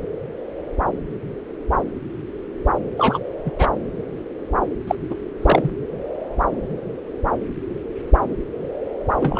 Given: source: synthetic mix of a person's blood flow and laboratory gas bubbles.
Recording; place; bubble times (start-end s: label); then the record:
Doppler ultrasound of blood flow; subclavian vein
2.97-3.19 s: bubbles
3.45-3.51 s: bubbles
3.58-3.69 s: bubbles
4.87-4.95 s: bubbles
5.10-5.15 s: bubbles
5.42-5.70 s: bubbles
9.18-9.40 s: bubbles
From the record:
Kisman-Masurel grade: 222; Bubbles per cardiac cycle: several, 3 to 8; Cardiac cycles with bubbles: 10 to 50%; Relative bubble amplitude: moderate (0.250 to 0.450); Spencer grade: 2 (many but less than half of the cardiac periods contain bubble signals, singularly or in groups); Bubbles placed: anywhere in the cardiac cycle